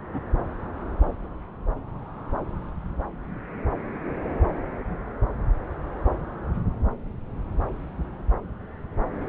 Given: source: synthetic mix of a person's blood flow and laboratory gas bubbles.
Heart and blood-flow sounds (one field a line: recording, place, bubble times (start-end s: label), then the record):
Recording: Doppler ultrasound of blood flow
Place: subclavian vein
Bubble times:
0.14-0.21 s: bubbles
From the record:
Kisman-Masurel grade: 211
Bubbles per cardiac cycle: several, 3 to 8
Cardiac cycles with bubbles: 1 to 10%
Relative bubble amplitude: barely perceptible (0.100 to 0.250)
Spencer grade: 1 (occasional bubble signal discernible with the cardiac motion signal, with majority of cardiac periods free of bubbles)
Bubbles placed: anywhere in the cardiac cycle